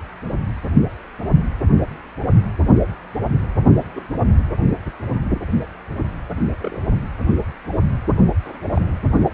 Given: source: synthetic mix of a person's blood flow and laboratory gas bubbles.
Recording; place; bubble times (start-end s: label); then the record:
Doppler ultrasound of blood flow; precordium
3.96-4.00 s: bubbles
6.61-6.82 s: bubbles
8.45-8.61 s: bubbles
8.75-8.81 s: bubbles
From the record:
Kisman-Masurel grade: 121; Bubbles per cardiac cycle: 1 to 2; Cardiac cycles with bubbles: 10 to 50%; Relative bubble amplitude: barely perceptible (0.100 to 0.250); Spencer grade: 2 (many but less than half of the cardiac periods contain bubble signals, singularly or in groups); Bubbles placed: only in the low amplitude regions of the cardiac cycle